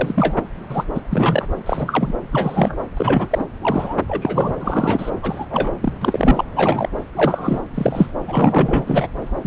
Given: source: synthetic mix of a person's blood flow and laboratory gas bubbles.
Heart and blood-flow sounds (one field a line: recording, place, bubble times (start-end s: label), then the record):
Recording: Doppler ultrasound of blood flow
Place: subclavian vein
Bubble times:
0.00-0.35 s: bubbles
0.71-0.85 s: bubbles
0.94-1.01 s: bubbles
1.10-1.46 s: bubbles
1.66-2.13 s: bubbles
2.31-2.79 s: bubbles
2.97-3.45 s: bubbles
3.62-3.95 s: bubbles
4.08-4.54 s: bubbles
4.59-5.11 s: bubbles
5.22-5.46 s: bubbles
5.50-5.71 s: bubbles
5.80-5.92 s: bubbles
6.00-6.45 s: bubbles
6.55-6.89 s: bubbles
7.15-7.61 s: bubbles
7.74-8.11 s: bubbles
8.27-9.07 s: bubbles
9.42-9.47 s: bubbles
From the record:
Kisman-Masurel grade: 243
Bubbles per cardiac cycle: several, 3 to 8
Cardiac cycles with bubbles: 100%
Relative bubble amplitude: loud (0.450 to 0.775)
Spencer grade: 3 (all of the cardiac periods contain showers or single bubble signals, but not dominating or overriding the cardiac motion signals)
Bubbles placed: anywhere in the cardiac cycle